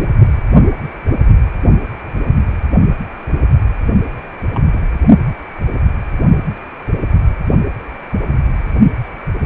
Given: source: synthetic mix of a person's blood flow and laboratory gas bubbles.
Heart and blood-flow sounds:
Doppler ultrasound of blood flow; precordium
4.43-4.47 s: bubbles
4.54-4.61 s: bubbles
4.72-4.80 s: bubbles
From the record:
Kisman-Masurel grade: 211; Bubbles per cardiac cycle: several, 3 to 8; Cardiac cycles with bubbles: 1 to 10%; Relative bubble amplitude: barely perceptible (0.100 to 0.250); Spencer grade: 1 (occasional bubble signal discernible with the cardiac motion signal, with majority of cardiac periods free of bubbles); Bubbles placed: only in the low amplitude regions of the cardiac cycle

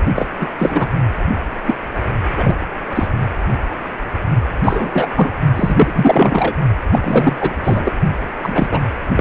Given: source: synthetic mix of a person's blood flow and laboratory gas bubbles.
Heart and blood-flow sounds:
Doppler ultrasound of blood flow; precordium
0.15-0.26 s: bubbles
0.39-0.47 s: bubbles
0.58-0.88 s: bubbles
1.66-1.74 s: bubbles
2.37-2.56 s: bubbles
2.95-3.08 s: bubbles
4.63-5.11 s: bubbles
5.16-5.32 s: bubbles
5.55-6.54 s: bubbles
6.92-7.37 s: bubbles
7.41-7.54 s: bubbles
7.63-7.92 s: bubbles
8.43-8.81 s: bubbles
9.12-9.21 s: bubbles
From the record:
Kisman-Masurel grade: 233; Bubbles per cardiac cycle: several, 3 to 8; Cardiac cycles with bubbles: 50 to 99%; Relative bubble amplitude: loud (0.450 to 0.775); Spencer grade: 3 (all of the cardiac periods contain showers or single bubble signals, but not dominating or overriding the cardiac motion signals); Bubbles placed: only in the low amplitude regions of the cardiac cycle

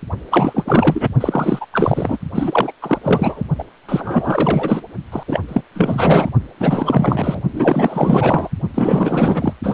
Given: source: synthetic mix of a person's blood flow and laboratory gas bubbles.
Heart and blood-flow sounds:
Doppler ultrasound of blood flow; precordium
0.30-1.08 s: bubbles
1.20-1.66 s: bubbles
1.73-2.18 s: bubbles
2.35-2.73 s: bubbles
2.82-2.99 s: bubbles
3.02-3.44 s: bubbles
3.58-3.64 s: bubbles
3.89-4.81 s: bubbles
5.12-5.23 s: bubbles
5.27-5.40 s: bubbles
5.48-5.61 s: bubbles
5.75-6.29 s: bubbles
6.59-7.40 s: bubbles
7.53-8.48 s: bubbles
8.74-9.53 s: bubbles
9.63-9.74 s: bubbles
From the record:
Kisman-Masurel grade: 444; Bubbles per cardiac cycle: continuous sound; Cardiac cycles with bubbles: 100%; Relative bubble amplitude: maximal (0.775 to 0.999); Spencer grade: 4 (maximum detectable bubble signal sounding continuously throughout systole and diastole of every cardiac period, and overriding the amplitude of the normal cardiac signals); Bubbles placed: only in the low amplitude regions of the cardiac cycle

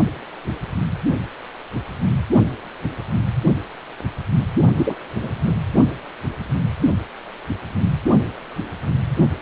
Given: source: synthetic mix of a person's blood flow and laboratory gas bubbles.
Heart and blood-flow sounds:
Doppler ultrasound of blood flow; precordium
4.77-4.95 s: bubbles
5.22-5.31 s: bubbles
5.45-5.53 s: bubbles
From the record:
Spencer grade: 2 (many but less than half of the cardiac periods contain bubble signals, singularly or in groups); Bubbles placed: only in the low amplitude regions of the cardiac cycle

